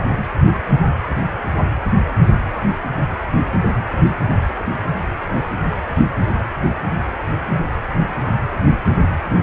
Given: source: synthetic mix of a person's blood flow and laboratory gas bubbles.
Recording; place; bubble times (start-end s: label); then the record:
Doppler ultrasound of blood flow; precordium
no bubbles
From the record:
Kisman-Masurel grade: 000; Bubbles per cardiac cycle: 0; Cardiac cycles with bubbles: 0%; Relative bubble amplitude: no bubbles discernible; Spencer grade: 0 (complete lack of bubble signals)